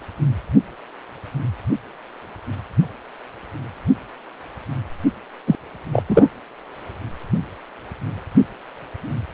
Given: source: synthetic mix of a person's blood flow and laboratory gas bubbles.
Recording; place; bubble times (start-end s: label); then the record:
Doppler ultrasound of blood flow; precordium
5.47-5.55 s: bubbles
5.92-6.03 s: bubbles
6.09-6.29 s: bubbles
From the record:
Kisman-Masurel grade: 123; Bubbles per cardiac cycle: 1 to 2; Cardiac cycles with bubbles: 10 to 50%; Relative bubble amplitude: loud (0.450 to 0.775); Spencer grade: 2 (many but less than half of the cardiac periods contain bubble signals, singularly or in groups); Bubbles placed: anywhere in the cardiac cycle